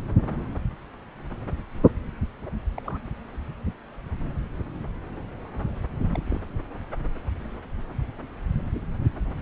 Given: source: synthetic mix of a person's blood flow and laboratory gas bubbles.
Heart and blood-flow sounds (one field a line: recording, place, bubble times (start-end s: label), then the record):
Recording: Doppler ultrasound of blood flow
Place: subclavian vein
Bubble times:
2.75-2.82 s: bubbles
2.85-3.00 s: bubbles
6.12-6.19 s: bubbles
6.24-6.41 s: bubbles
From the record:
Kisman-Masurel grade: 121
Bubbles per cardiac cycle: 1 to 2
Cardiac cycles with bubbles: 10 to 50%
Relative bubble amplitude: barely perceptible (0.100 to 0.250)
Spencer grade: 2 (many but less than half of the cardiac periods contain bubble signals, singularly or in groups)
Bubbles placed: anywhere in the cardiac cycle